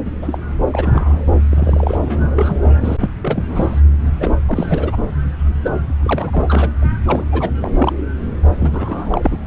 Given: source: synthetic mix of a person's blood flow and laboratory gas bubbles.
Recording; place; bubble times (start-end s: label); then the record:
Doppler ultrasound of blood flow; subclavian vein
0.04-0.10 s: bubbles
0.22-0.38 s: bubbles
0.72-1.28 s: bubbles
1.48-1.98 s: bubbles
2.05-2.57 s: bubbles
2.81-2.97 s: bubbles
3.00-3.10 s: bubbles
3.21-3.81 s: bubbles
4.20-4.31 s: bubbles
4.47-4.98 s: bubbles
5.62-5.70 s: bubbles
6.03-6.43 s: bubbles
6.47-6.71 s: bubbles
6.80-6.92 s: bubbles
7.03-7.26 s: bubbles
7.31-7.50 s: bubbles
7.59-7.70 s: bubbles
7.79-7.93 s: bubbles
8.53-9.38 s: bubbles
From the record:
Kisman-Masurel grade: 342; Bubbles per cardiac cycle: rolling drumbeat, 9 or more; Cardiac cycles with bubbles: 100%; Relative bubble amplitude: moderate (0.250 to 0.450); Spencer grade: 3 (all of the cardiac periods contain showers or single bubble signals, but not dominating or overriding the cardiac motion signals); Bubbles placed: anywhere in the cardiac cycle